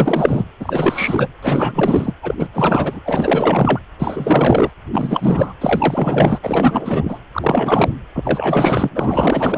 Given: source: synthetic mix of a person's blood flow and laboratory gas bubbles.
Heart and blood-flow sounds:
Doppler ultrasound of blood flow; precordium
0.00-0.47 s: bubbles
0.59-1.28 s: bubbles
1.42-2.13 s: bubbles
2.22-2.34 s: bubbles
2.38-2.48 s: bubbles
2.54-3.00 s: bubbles
3.05-3.80 s: bubbles
3.99-4.71 s: bubbles
4.93-5.54 s: bubbles
5.61-6.39 s: bubbles
6.42-7.19 s: bubbles
7.33-7.92 s: bubbles
8.14-8.88 s: bubbles
8.95-9.58 s: bubbles
From the record:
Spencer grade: 4 (maximum detectable bubble signal sounding continuously throughout systole and diastole of every cardiac period, and overriding the amplitude of the normal cardiac signals); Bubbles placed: anywhere in the cardiac cycle

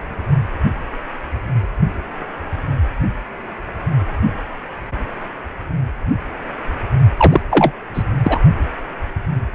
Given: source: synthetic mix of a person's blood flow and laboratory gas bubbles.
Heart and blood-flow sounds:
Doppler ultrasound of blood flow; precordium
7.17-7.40 s: bubbles
7.50-7.72 s: bubbles
7.94-8.04 s: bubbles
8.22-8.38 s: bubbles
From the record:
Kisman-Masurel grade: 213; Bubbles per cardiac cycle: several, 3 to 8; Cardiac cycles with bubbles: 1 to 10%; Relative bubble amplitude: loud (0.450 to 0.775); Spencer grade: 1 (occasional bubble signal discernible with the cardiac motion signal, with majority of cardiac periods free of bubbles); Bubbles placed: only in the low amplitude regions of the cardiac cycle

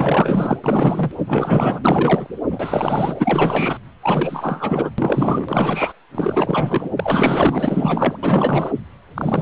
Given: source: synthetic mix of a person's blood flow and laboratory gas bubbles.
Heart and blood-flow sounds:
Doppler ultrasound of blood flow; precordium
0.00-0.57 s: bubbles
0.64-1.11 s: bubbles
1.18-1.80 s: bubbles
1.84-2.27 s: bubbles
2.50-3.78 s: bubbles
4.02-4.90 s: bubbles
4.98-5.92 s: bubbles
6.15-6.90 s: bubbles
6.96-8.17 s: bubbles
8.22-8.72 s: bubbles
9.14-9.42 s: bubbles
From the record:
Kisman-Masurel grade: 444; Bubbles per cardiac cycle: continuous sound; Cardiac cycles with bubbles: 100%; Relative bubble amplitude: maximal (0.775 to 0.999); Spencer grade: 4 (maximum detectable bubble signal sounding continuously throughout systole and diastole of every cardiac period, and overriding the amplitude of the normal cardiac signals); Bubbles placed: anywhere in the cardiac cycle

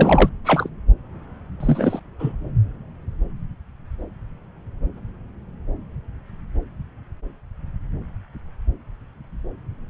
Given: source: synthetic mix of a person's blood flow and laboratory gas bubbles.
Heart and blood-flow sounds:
Doppler ultrasound of blood flow; subclavian vein
0.00-0.30 s: bubbles
0.44-0.68 s: bubbles
1.60-2.00 s: bubbles
2.19-2.34 s: bubbles
From the record:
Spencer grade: 2 (many but less than half of the cardiac periods contain bubble signals, singularly or in groups); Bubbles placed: anywhere in the cardiac cycle

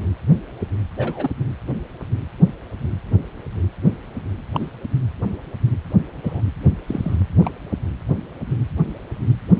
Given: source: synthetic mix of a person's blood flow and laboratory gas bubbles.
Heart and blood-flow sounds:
Doppler ultrasound of blood flow; precordium
0.97-1.29 s: bubbles
4.53-4.70 s: bubbles
6.24-6.41 s: bubbles
6.87-7.17 s: bubbles
7.41-7.51 s: bubbles
From the record:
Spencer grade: 2 (many but less than half of the cardiac periods contain bubble signals, singularly or in groups); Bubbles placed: anywhere in the cardiac cycle

